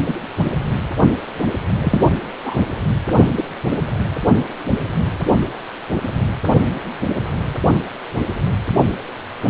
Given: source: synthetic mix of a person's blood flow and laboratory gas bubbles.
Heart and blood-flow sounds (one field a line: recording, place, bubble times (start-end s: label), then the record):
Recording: Doppler ultrasound of blood flow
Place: precordium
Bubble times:
0.07-0.17 s: bubbles
1.79-2.06 s: bubbles
2.44-2.61 s: bubbles
3.37-3.44 s: bubbles
From the record:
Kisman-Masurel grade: 122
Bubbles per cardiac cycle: 1 to 2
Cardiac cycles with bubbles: 10 to 50%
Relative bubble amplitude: moderate (0.250 to 0.450)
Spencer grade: 2 (many but less than half of the cardiac periods contain bubble signals, singularly or in groups)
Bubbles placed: only in the low amplitude regions of the cardiac cycle